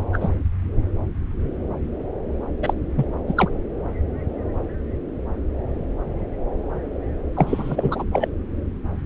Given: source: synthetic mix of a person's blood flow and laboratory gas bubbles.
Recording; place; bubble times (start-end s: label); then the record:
Doppler ultrasound of blood flow; subclavian vein
0.00-0.05 s: bubbles
0.13-0.30 s: bubbles
2.62-2.73 s: bubbles
2.96-3.06 s: bubbles
3.27-3.33 s: bubbles
3.37-3.50 s: bubbles
7.36-8.04 s: bubbles
8.12-8.28 s: bubbles
From the record:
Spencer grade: 2 (many but less than half of the cardiac periods contain bubble signals, singularly or in groups); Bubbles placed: anywhere in the cardiac cycle